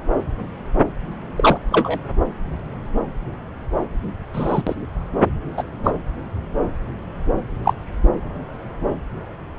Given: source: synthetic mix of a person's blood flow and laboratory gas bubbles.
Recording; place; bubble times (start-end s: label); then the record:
Doppler ultrasound of blood flow; subclavian vein
1.36-1.57 s: bubbles
1.72-1.99 s: bubbles
4.33-4.62 s: bubbles
4.67-4.75 s: bubbles
5.57-5.63 s: bubbles
5.84-5.92 s: bubbles
7.65-7.73 s: bubbles
From the record:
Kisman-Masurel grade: 123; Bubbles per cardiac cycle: 1 to 2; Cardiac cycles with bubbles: 10 to 50%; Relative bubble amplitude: loud (0.450 to 0.775); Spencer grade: 2 (many but less than half of the cardiac periods contain bubble signals, singularly or in groups); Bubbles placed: anywhere in the cardiac cycle